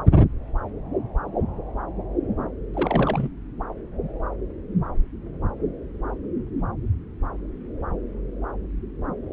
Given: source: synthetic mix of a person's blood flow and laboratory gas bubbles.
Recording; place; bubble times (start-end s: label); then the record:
Doppler ultrasound of blood flow; subclavian vein
2.75-3.29 s: bubbles
From the record:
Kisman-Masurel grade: 211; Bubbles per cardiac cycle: several, 3 to 8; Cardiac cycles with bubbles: 1 to 10%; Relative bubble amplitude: barely perceptible (0.100 to 0.250); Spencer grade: 1 (occasional bubble signal discernible with the cardiac motion signal, with majority of cardiac periods free of bubbles); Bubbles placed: anywhere in the cardiac cycle